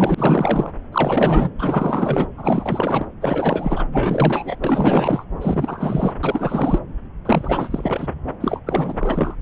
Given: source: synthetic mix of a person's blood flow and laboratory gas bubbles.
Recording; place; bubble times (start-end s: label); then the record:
Doppler ultrasound of blood flow; subclavian vein
0.00-0.14 s: bubbles
0.17-0.73 s: bubbles
0.92-1.50 s: bubbles
1.58-2.26 s: bubbles
2.37-3.07 s: bubbles
3.21-3.85 s: bubbles
3.92-4.56 s: bubbles
4.62-5.25 s: bubbles
5.41-6.15 s: bubbles
6.23-6.79 s: bubbles
7.25-8.07 s: bubbles
8.40-8.61 s: bubbles
8.66-9.36 s: bubbles
From the record:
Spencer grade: 4 (maximum detectable bubble signal sounding continuously throughout systole and diastole of every cardiac period, and overriding the amplitude of the normal cardiac signals); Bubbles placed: anywhere in the cardiac cycle